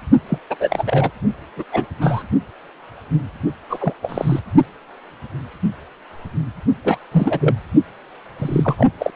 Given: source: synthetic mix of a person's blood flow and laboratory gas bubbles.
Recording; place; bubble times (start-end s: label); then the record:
Doppler ultrasound of blood flow; precordium
0.29-0.38 s: bubbles
0.50-0.55 s: bubbles
0.59-0.84 s: bubbles
0.87-1.11 s: bubbles
1.56-1.64 s: bubbles
1.72-1.85 s: bubbles
2.00-2.23 s: bubbles
3.70-3.94 s: bubbles
4.02-4.40 s: bubbles
6.84-6.99 s: bubbles
7.12-7.55 s: bubbles
8.38-8.75 s: bubbles
8.78-8.87 s: bubbles
8.98-9.10 s: bubbles
From the record:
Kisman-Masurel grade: 232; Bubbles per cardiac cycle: several, 3 to 8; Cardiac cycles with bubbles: 50 to 99%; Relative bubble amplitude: moderate (0.250 to 0.450); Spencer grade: 3 (all of the cardiac periods contain showers or single bubble signals, but not dominating or overriding the cardiac motion signals); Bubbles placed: only in the low amplitude regions of the cardiac cycle